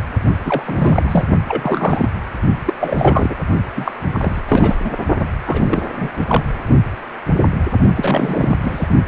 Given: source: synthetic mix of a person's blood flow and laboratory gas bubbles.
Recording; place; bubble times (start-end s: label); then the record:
Doppler ultrasound of blood flow; precordium
0.45-0.63 s: bubbles
0.67-1.26 s: bubbles
1.48-2.24 s: bubbles
2.65-2.74 s: bubbles
2.79-3.35 s: bubbles
3.75-3.92 s: bubbles
4.13-4.42 s: bubbles
4.48-4.75 s: bubbles
4.85-4.91 s: bubbles
5.20-5.25 s: bubbles
5.46-5.83 s: bubbles
5.96-6.09 s: bubbles
6.17-6.25 s: bubbles
6.28-6.43 s: bubbles
7.96-8.55 s: bubbles
8.63-8.88 s: bubbles
From the record:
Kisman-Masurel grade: 333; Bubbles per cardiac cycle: rolling drumbeat, 9 or more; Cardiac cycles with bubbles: 50 to 99%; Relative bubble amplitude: loud (0.450 to 0.775); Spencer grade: 3 (all of the cardiac periods contain showers or single bubble signals, but not dominating or overriding the cardiac motion signals); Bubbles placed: only in the low amplitude regions of the cardiac cycle